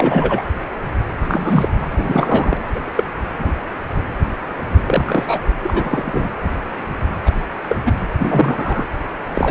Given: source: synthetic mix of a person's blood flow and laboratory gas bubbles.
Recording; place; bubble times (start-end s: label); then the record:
Doppler ultrasound of blood flow; precordium
0.00-0.42 s: bubbles
1.28-1.69 s: bubbles
1.81-1.86 s: bubbles
1.90-2.57 s: bubbles
2.68-3.08 s: bubbles
3.39-3.51 s: bubbles
4.86-5.54 s: bubbles
5.58-6.28 s: bubbles
7.25-7.31 s: bubbles
7.68-7.77 s: bubbles
7.85-7.93 s: bubbles
8.15-8.87 s: bubbles
9.34-9.51 s: bubbles
From the record:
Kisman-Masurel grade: 233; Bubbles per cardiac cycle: several, 3 to 8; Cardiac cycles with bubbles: 50 to 99%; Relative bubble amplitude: loud (0.450 to 0.775); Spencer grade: 3 (all of the cardiac periods contain showers or single bubble signals, but not dominating or overriding the cardiac motion signals); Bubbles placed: anywhere in the cardiac cycle